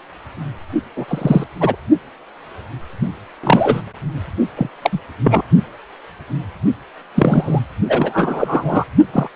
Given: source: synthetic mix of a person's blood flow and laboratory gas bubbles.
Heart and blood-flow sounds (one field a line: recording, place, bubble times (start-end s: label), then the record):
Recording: Doppler ultrasound of blood flow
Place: precordium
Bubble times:
0.96-1.44 s: bubbles
1.60-1.76 s: bubbles
3.44-3.82 s: bubbles
4.56-4.70 s: bubbles
4.82-5.00 s: bubbles
5.24-5.42 s: bubbles
7.15-7.61 s: bubbles
7.88-8.85 s: bubbles
9.12-9.29 s: bubbles
From the record:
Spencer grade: 3 (all of the cardiac periods contain showers or single bubble signals, but not dominating or overriding the cardiac motion signals)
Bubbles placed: only in the low amplitude regions of the cardiac cycle